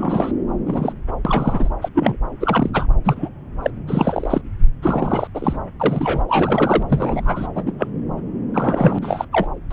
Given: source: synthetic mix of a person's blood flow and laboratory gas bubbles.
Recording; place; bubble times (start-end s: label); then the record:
Doppler ultrasound of blood flow; subclavian vein
0.00-0.32 s: bubbles
0.66-0.93 s: bubbles
1.25-1.70 s: bubbles
1.81-1.89 s: bubbles
1.94-2.18 s: bubbles
2.40-2.70 s: bubbles
2.73-2.86 s: bubbles
3.04-3.29 s: bubbles
3.62-3.71 s: bubbles
3.88-4.42 s: bubbles
4.82-5.27 s: bubbles
5.34-5.57 s: bubbles
5.79-6.24 s: bubbles
6.28-6.83 s: bubbles
6.88-7.47 s: bubbles
7.55-7.72 s: bubbles
7.78-7.88 s: bubbles
8.54-8.99 s: bubbles
9.02-9.26 s: bubbles
9.32-9.47 s: bubbles
9.70-9.73 s: bubbles
From the record:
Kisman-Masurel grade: 243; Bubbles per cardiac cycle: several, 3 to 8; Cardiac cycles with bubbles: 100%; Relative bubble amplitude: loud (0.450 to 0.775); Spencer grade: 3 (all of the cardiac periods contain showers or single bubble signals, but not dominating or overriding the cardiac motion signals); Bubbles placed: anywhere in the cardiac cycle